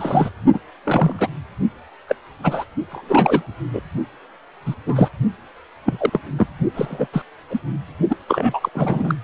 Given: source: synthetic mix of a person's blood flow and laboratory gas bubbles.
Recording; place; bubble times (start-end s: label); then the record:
Doppler ultrasound of blood flow; precordium
0.00-0.29 s: bubbles
0.53-0.60 s: bubbles
0.85-1.28 s: bubbles
2.08-2.15 s: bubbles
2.43-2.64 s: bubbles
2.89-3.42 s: bubbles
3.73-3.82 s: bubbles
4.65-4.75 s: bubbles
4.86-5.09 s: bubbles
5.85-6.09 s: bubbles
6.12-6.20 s: bubbles
6.38-6.46 s: bubbles
6.74-7.07 s: bubbles
7.12-7.22 s: bubbles
7.50-7.59 s: bubbles
8.09-8.17 s: bubbles
8.28-8.69 s: bubbles
8.75-9.15 s: bubbles
From the record:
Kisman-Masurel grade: 243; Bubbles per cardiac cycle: several, 3 to 8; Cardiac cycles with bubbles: 100%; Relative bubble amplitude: loud (0.450 to 0.775); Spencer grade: 3 (all of the cardiac periods contain showers or single bubble signals, but not dominating or overriding the cardiac motion signals); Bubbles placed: only in the low amplitude regions of the cardiac cycle